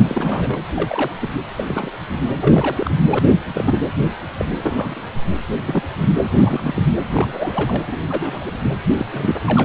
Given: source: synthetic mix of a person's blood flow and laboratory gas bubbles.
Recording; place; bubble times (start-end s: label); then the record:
Doppler ultrasound of blood flow; precordium
0.00-0.58 s: bubbles
0.74-1.12 s: bubbles
1.16-1.30 s: bubbles
1.56-1.64 s: bubbles
1.67-1.92 s: bubbles
2.40-2.91 s: bubbles
3.04-3.19 s: bubbles
3.25-3.33 s: bubbles
3.54-3.80 s: bubbles
4.39-5.01 s: bubbles
5.68-5.83 s: bubbles
6.00-6.12 s: bubbles
6.21-6.30 s: bubbles
6.33-6.85 s: bubbles
7.13-7.83 s: bubbles
7.87-7.98 s: bubbles
8.10-8.51 s: bubbles
8.97-9.06 s: bubbles
9.12-9.36 s: bubbles
9.45-9.63 s: bubbles
From the record:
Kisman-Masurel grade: 242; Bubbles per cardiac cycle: several, 3 to 8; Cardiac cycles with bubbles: 100%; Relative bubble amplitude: moderate (0.250 to 0.450); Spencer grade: 3 (all of the cardiac periods contain showers or single bubble signals, but not dominating or overriding the cardiac motion signals); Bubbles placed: anywhere in the cardiac cycle